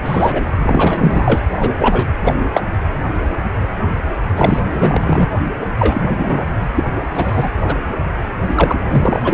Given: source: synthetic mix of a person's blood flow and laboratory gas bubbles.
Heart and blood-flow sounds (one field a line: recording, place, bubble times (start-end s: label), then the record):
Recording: Doppler ultrasound of blood flow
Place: precordium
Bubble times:
0.05-0.42 s: bubbles
0.62-1.44 s: bubbles
1.57-1.72 s: bubbles
1.79-2.08 s: bubbles
2.24-2.34 s: bubbles
2.53-2.61 s: bubbles
4.36-4.61 s: bubbles
4.73-5.29 s: bubbles
5.79-6.45 s: bubbles
6.75-6.83 s: bubbles
7.13-7.50 s: bubbles
7.64-7.75 s: bubbles
8.55-8.73 s: bubbles
8.80-9.18 s: bubbles
9.24-9.34 s: bubbles
From the record:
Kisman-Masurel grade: 233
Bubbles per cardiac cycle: several, 3 to 8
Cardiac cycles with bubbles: 50 to 99%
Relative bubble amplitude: loud (0.450 to 0.775)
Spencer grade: 3 (all of the cardiac periods contain showers or single bubble signals, but not dominating or overriding the cardiac motion signals)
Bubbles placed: anywhere in the cardiac cycle